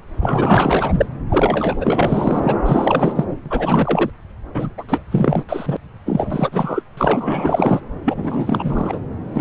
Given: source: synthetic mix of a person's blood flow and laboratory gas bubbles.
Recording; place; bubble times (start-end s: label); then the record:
Doppler ultrasound of blood flow; subclavian vein
0.20-1.06 s: bubbles
1.29-2.56 s: bubbles
2.65-3.25 s: bubbles
3.46-4.10 s: bubbles
4.54-4.69 s: bubbles
4.78-4.84 s: bubbles
4.89-5.02 s: bubbles
5.11-5.43 s: bubbles
5.49-5.77 s: bubbles
6.06-6.83 s: bubbles
6.97-7.80 s: bubbles
8.04-9.00 s: bubbles
9.33-9.41 s: bubbles
From the record:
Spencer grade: 4 (maximum detectable bubble signal sounding continuously throughout systole and diastole of every cardiac period, and overriding the amplitude of the normal cardiac signals); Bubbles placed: anywhere in the cardiac cycle